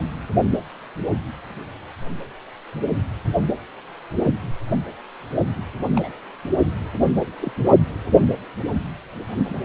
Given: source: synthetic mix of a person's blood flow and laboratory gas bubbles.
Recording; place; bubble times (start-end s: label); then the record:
Doppler ultrasound of blood flow; precordium
5.95-6.09 s: bubbles
7.42-7.52 s: bubbles
From the record:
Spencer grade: 2 (many but less than half of the cardiac periods contain bubble signals, singularly or in groups); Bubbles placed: only in the low amplitude regions of the cardiac cycle